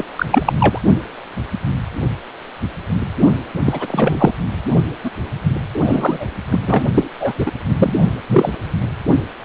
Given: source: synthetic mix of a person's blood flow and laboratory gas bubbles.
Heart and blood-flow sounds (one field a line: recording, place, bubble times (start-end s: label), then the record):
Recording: Doppler ultrasound of blood flow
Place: precordium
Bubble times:
0.00-0.04 s: bubbles
0.17-0.26 s: bubbles
0.31-0.53 s: bubbles
0.59-0.79 s: bubbles
3.63-4.32 s: bubbles
5.04-5.10 s: bubbles
5.73-6.27 s: bubbles
6.52-6.59 s: bubbles
6.66-6.83 s: bubbles
6.94-7.08 s: bubbles
7.20-7.33 s: bubbles
7.39-7.52 s: bubbles
7.78-7.95 s: bubbles
8.28-8.55 s: bubbles
From the record:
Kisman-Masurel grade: 233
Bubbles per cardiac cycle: several, 3 to 8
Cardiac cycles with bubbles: 50 to 99%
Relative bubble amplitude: loud (0.450 to 0.775)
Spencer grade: 3 (all of the cardiac periods contain showers or single bubble signals, but not dominating or overriding the cardiac motion signals)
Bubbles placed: only in the low amplitude regions of the cardiac cycle